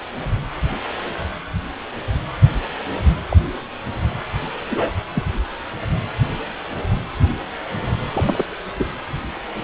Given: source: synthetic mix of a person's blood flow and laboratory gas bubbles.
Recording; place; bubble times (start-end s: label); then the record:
Doppler ultrasound of blood flow; precordium
3.29-3.37 s: bubbles
4.69-4.92 s: bubbles
5.15-5.24 s: bubbles
8.13-8.45 s: bubbles
8.79-8.88 s: bubbles
From the record:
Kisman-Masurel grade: 122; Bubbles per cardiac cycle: 1 to 2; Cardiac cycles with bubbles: 10 to 50%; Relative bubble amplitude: moderate (0.250 to 0.450); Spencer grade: 2 (many but less than half of the cardiac periods contain bubble signals, singularly or in groups); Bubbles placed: anywhere in the cardiac cycle